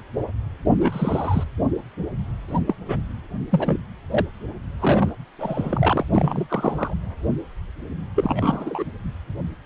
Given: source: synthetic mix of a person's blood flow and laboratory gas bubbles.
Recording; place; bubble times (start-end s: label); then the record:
Doppler ultrasound of blood flow; precordium
0.80-1.43 s: bubbles
2.48-2.60 s: bubbles
2.67-2.75 s: bubbles
2.80-2.98 s: bubbles
3.50-3.79 s: bubbles
4.10-4.25 s: bubbles
4.80-5.12 s: bubbles
5.38-6.06 s: bubbles
6.13-6.94 s: bubbles
8.15-8.84 s: bubbles
From the record:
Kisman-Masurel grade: 232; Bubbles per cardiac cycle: several, 3 to 8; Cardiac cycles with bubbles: 50 to 99%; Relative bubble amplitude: moderate (0.250 to 0.450); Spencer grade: 3 (all of the cardiac periods contain showers or single bubble signals, but not dominating or overriding the cardiac motion signals); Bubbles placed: anywhere in the cardiac cycle